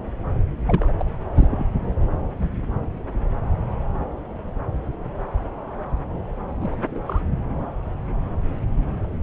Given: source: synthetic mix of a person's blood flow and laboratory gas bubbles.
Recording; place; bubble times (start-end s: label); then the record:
Doppler ultrasound of blood flow; subclavian vein
0.66-0.92 s: bubbles
0.98-1.10 s: bubbles
1.36-1.48 s: bubbles
1.50-1.65 s: bubbles
6.60-7.04 s: bubbles
7.06-7.22 s: bubbles
From the record:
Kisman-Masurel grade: 211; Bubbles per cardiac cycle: several, 3 to 8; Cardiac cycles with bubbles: 1 to 10%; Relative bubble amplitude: barely perceptible (0.100 to 0.250); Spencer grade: 1 (occasional bubble signal discernible with the cardiac motion signal, with majority of cardiac periods free of bubbles); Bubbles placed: anywhere in the cardiac cycle